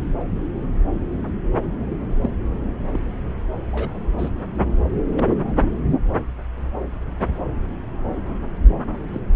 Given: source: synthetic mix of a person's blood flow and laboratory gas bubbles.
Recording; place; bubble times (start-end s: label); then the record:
Doppler ultrasound of blood flow; subclavian vein
2.22-2.30 s: bubbles
2.93-2.99 s: bubbles
3.71-3.98 s: bubbles
4.18-4.29 s: bubbles
5.16-5.25 s: bubbles
9.13-9.21 s: bubbles
From the record:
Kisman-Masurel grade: 121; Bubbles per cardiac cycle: 1 to 2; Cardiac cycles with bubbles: 10 to 50%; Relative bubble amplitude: barely perceptible (0.100 to 0.250); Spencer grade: 2 (many but less than half of the cardiac periods contain bubble signals, singularly or in groups); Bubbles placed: anywhere in the cardiac cycle